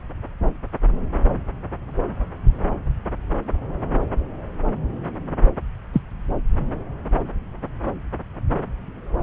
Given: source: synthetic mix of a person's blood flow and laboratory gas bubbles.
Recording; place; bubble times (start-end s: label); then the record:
Doppler ultrasound of blood flow; subclavian vein
5.93-6.01 s: bubbles
From the record:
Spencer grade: 1 (occasional bubble signal discernible with the cardiac motion signal, with majority of cardiac periods free of bubbles); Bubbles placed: anywhere in the cardiac cycle